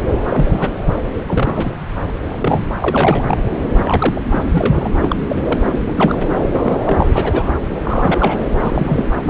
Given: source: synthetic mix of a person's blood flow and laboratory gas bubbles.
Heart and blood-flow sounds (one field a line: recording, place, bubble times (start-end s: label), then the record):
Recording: Doppler ultrasound of blood flow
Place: subclavian vein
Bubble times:
0.00-0.02 s: bubbles
0.30-0.72 s: bubbles
1.27-1.71 s: bubbles
2.06-2.10 s: bubbles
2.29-2.73 s: bubbles
2.80-3.38 s: bubbles
3.81-4.21 s: bubbles
4.30-4.45 s: bubbles
4.51-4.90 s: bubbles
5.02-5.16 s: bubbles
5.29-5.38 s: bubbles
5.43-5.58 s: bubbles
5.73-5.79 s: bubbles
5.86-5.92 s: bubbles
5.96-6.21 s: bubbles
6.51-6.80 s: bubbles
6.85-7.06 s: bubbles
7.13-7.60 s: bubbles
7.83-8.49 s: bubbles
8.62-9.05 s: bubbles
9.24-9.30 s: bubbles
From the record:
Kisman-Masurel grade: 232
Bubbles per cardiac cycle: several, 3 to 8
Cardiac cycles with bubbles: 50 to 99%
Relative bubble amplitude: moderate (0.250 to 0.450)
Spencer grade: 3 (all of the cardiac periods contain showers or single bubble signals, but not dominating or overriding the cardiac motion signals)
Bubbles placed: anywhere in the cardiac cycle